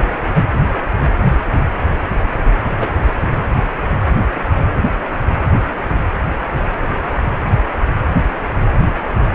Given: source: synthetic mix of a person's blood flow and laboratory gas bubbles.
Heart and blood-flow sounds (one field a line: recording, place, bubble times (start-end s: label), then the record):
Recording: Doppler ultrasound of blood flow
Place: precordium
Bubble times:
2.80-2.91 s: bubbles
From the record:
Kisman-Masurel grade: 112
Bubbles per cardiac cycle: 1 to 2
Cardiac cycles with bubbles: 1 to 10%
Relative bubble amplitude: moderate (0.250 to 0.450)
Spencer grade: 1 (occasional bubble signal discernible with the cardiac motion signal, with majority of cardiac periods free of bubbles)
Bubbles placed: anywhere in the cardiac cycle